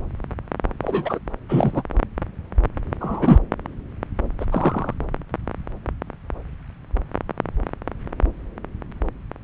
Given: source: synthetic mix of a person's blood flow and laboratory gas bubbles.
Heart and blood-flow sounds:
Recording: Doppler ultrasound of blood flow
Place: subclavian vein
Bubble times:
0.82-1.19 s: bubbles
1.49-1.83 s: bubbles
3.00-3.39 s: bubbles
4.40-4.45 s: bubbles
4.51-4.94 s: bubbles
From the record:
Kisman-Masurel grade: 223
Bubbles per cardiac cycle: several, 3 to 8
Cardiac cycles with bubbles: 10 to 50%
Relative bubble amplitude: loud (0.450 to 0.775)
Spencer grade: 2 (many but less than half of the cardiac periods contain bubble signals, singularly or in groups)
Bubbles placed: anywhere in the cardiac cycle

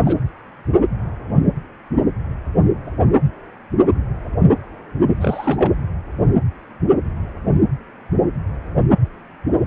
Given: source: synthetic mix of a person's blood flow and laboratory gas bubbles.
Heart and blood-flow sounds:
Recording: Doppler ultrasound of blood flow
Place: precordium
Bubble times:
0.05-0.18 s: bubbles
5.17-5.73 s: bubbles
From the record:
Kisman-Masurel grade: 212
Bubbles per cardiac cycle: several, 3 to 8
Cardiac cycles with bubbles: 1 to 10%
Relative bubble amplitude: moderate (0.250 to 0.450)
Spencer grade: 1 (occasional bubble signal discernible with the cardiac motion signal, with majority of cardiac periods free of bubbles)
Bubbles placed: anywhere in the cardiac cycle

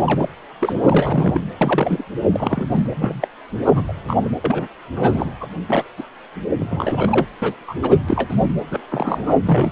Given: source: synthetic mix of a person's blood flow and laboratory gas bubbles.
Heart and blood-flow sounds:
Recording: Doppler ultrasound of blood flow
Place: precordium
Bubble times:
0.06-0.29 s: bubbles
0.60-0.80 s: bubbles
0.84-1.41 s: bubbles
1.61-2.04 s: bubbles
2.31-2.68 s: bubbles
2.71-2.87 s: bubbles
2.91-3.27 s: bubbles
3.65-3.93 s: bubbles
4.08-4.17 s: bubbles
4.21-4.29 s: bubbles
4.44-4.67 s: bubbles
4.95-5.32 s: bubbles
5.41-5.47 s: bubbles
5.67-5.88 s: bubbles
5.97-6.02 s: bubbles
6.59-7.25 s: bubbles
7.42-7.55 s: bubbles
7.67-7.75 s: bubbles
7.83-8.01 s: bubbles
8.09-8.46 s: bubbles
8.71-8.80 s: bubbles
8.90-9.38 s: bubbles
9.46-9.72 s: bubbles
From the record:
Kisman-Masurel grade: 242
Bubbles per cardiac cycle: several, 3 to 8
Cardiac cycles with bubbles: 100%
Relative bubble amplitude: moderate (0.250 to 0.450)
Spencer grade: 3 (all of the cardiac periods contain showers or single bubble signals, but not dominating or overriding the cardiac motion signals)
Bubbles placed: anywhere in the cardiac cycle

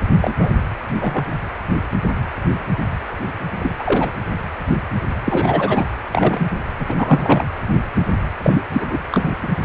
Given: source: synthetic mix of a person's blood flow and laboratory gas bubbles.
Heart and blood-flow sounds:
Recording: Doppler ultrasound of blood flow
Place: precordium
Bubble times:
0.21-0.54 s: bubbles
0.98-1.25 s: bubbles
3.59-3.73 s: bubbles
3.78-4.12 s: bubbles
5.25-5.88 s: bubbles
6.12-6.48 s: bubbles
6.79-7.46 s: bubbles
8.43-8.62 s: bubbles
8.73-9.01 s: bubbles
9.12-9.30 s: bubbles
9.42-9.48 s: bubbles
From the record:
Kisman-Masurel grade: 233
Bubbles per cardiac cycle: several, 3 to 8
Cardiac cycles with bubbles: 50 to 99%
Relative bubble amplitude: loud (0.450 to 0.775)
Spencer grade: 3 (all of the cardiac periods contain showers or single bubble signals, but not dominating or overriding the cardiac motion signals)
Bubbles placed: anywhere in the cardiac cycle

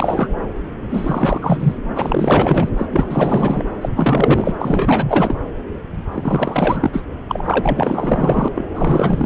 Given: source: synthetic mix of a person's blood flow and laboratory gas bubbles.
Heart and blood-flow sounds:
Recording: Doppler ultrasound of blood flow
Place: subclavian vein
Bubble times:
0.00-0.29 s: bubbles
0.89-1.76 s: bubbles
1.96-2.69 s: bubbles
2.77-2.86 s: bubbles
2.90-3.64 s: bubbles
3.81-3.89 s: bubbles
3.96-4.56 s: bubbles
4.60-5.37 s: bubbles
6.12-7.02 s: bubbles
7.28-8.49 s: bubbles
8.54-8.70 s: bubbles
8.75-9.26 s: bubbles
From the record:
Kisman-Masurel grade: 444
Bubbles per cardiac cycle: continuous sound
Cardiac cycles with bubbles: 100%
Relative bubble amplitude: maximal (0.775 to 0.999)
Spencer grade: 4 (maximum detectable bubble signal sounding continuously throughout systole and diastole of every cardiac period, and overriding the amplitude of the normal cardiac signals)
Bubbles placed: anywhere in the cardiac cycle

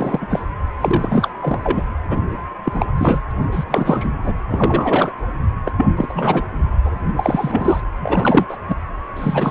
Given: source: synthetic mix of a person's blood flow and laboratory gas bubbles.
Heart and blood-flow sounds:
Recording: Doppler ultrasound of blood flow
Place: precordium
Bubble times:
0.00-0.44 s: bubbles
0.81-1.30 s: bubbles
1.39-1.83 s: bubbles
2.08-2.38 s: bubbles
2.65-2.86 s: bubbles
2.98-3.20 s: bubbles
3.30-3.32 s: bubbles
3.51-3.65 s: bubbles
3.68-4.18 s: bubbles
4.24-4.33 s: bubbles
4.48-5.12 s: bubbles
5.66-5.72 s: bubbles
5.77-5.85 s: bubbles
5.97-6.44 s: bubbles
6.84-6.91 s: bubbles
7.17-7.81 s: bubbles
8.00-8.46 s: bubbles
8.49-8.57 s: bubbles
8.68-8.75 s: bubbles
9.16-9.51 s: bubbles
From the record:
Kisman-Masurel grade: 343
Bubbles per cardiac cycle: rolling drumbeat, 9 or more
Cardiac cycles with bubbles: 100%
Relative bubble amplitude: loud (0.450 to 0.775)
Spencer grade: 3 (all of the cardiac periods contain showers or single bubble signals, but not dominating or overriding the cardiac motion signals)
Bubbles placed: anywhere in the cardiac cycle

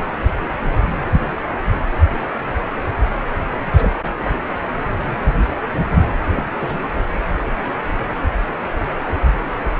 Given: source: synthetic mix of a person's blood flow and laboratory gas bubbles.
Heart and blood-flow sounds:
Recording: Doppler ultrasound of blood flow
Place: precordium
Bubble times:
3.67-3.98 s: bubbles
4.10-4.14 s: bubbles
4.21-4.36 s: bubbles
6.25-6.42 s: bubbles
6.56-6.78 s: bubbles
From the record:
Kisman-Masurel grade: 221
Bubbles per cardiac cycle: several, 3 to 8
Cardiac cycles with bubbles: 10 to 50%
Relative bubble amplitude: barely perceptible (0.100 to 0.250)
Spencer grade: 2 (many but less than half of the cardiac periods contain bubble signals, singularly or in groups)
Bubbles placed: anywhere in the cardiac cycle

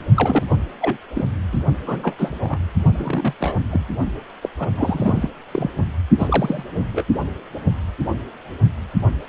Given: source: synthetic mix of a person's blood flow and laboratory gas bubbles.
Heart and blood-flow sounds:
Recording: Doppler ultrasound of blood flow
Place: precordium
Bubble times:
0.14-0.43 s: bubbles
0.50-0.55 s: bubbles
0.80-0.98 s: bubbles
1.15-1.26 s: bubbles
1.52-1.58 s: bubbles
1.86-2.15 s: bubbles
2.18-2.58 s: bubbles
2.94-3.34 s: bubbles
3.40-3.58 s: bubbles
3.71-3.84 s: bubbles
4.42-4.49 s: bubbles
4.58-4.68 s: bubbles
4.76-5.29 s: bubbles
5.51-5.71 s: bubbles
6.18-6.63 s: bubbles
6.75-6.83 s: bubbles
6.92-7.04 s: bubbles
From the record:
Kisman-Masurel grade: 232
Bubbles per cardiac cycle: several, 3 to 8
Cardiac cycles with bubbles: 50 to 99%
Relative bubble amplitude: moderate (0.250 to 0.450)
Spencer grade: 3 (all of the cardiac periods contain showers or single bubble signals, but not dominating or overriding the cardiac motion signals)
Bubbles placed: only in the low amplitude regions of the cardiac cycle

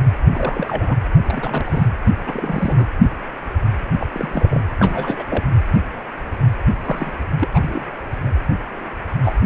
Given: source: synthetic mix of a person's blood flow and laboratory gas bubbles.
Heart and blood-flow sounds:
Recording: Doppler ultrasound of blood flow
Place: precordium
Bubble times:
0.33-0.97 s: bubbles
1.27-1.93 s: bubbles
2.26-2.85 s: bubbles
4.00-4.07 s: bubbles
4.12-4.62 s: bubbles
4.79-5.44 s: bubbles
6.84-7.13 s: bubbles
7.40-7.49 s: bubbles
7.52-7.86 s: bubbles
9.25-9.32 s: bubbles
From the record:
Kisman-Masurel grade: 232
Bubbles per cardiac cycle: several, 3 to 8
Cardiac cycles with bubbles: 50 to 99%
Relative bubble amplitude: moderate (0.250 to 0.450)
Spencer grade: 3 (all of the cardiac periods contain showers or single bubble signals, but not dominating or overriding the cardiac motion signals)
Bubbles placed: anywhere in the cardiac cycle

